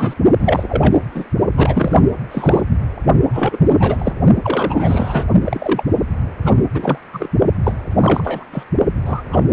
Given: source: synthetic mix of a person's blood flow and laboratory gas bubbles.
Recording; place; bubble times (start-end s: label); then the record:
Doppler ultrasound of blood flow; precordium
0.00-0.15 s: bubbles
0.39-1.03 s: bubbles
1.15-1.25 s: bubbles
1.56-2.01 s: bubbles
2.31-2.61 s: bubbles
3.33-3.57 s: bubbles
3.66-4.13 s: bubbles
4.42-5.25 s: bubbles
5.46-5.83 s: bubbles
6.42-6.63 s: bubbles
6.74-6.98 s: bubbles
7.13-7.29 s: bubbles
7.63-7.73 s: bubbles
8.00-8.44 s: bubbles
8.52-8.63 s: bubbles
9.05-9.21 s: bubbles
9.31-9.43 s: bubbles
From the record:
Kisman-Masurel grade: 343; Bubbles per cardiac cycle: rolling drumbeat, 9 or more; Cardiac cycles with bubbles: 100%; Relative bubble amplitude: loud (0.450 to 0.775); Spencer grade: 3 (all of the cardiac periods contain showers or single bubble signals, but not dominating or overriding the cardiac motion signals); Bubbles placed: only in the low amplitude regions of the cardiac cycle